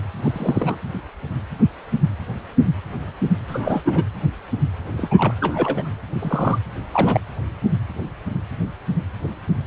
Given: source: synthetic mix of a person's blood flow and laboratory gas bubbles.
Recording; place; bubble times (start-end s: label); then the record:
Doppler ultrasound of blood flow; precordium
0.22-0.76 s: bubbles
3.48-3.82 s: bubbles
3.84-4.04 s: bubbles
4.97-5.33 s: bubbles
5.40-5.89 s: bubbles
6.20-6.58 s: bubbles
6.93-7.21 s: bubbles
From the record:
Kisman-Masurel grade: 222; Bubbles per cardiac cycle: several, 3 to 8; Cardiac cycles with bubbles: 10 to 50%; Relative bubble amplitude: moderate (0.250 to 0.450); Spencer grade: 2 (many but less than half of the cardiac periods contain bubble signals, singularly or in groups); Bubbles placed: anywhere in the cardiac cycle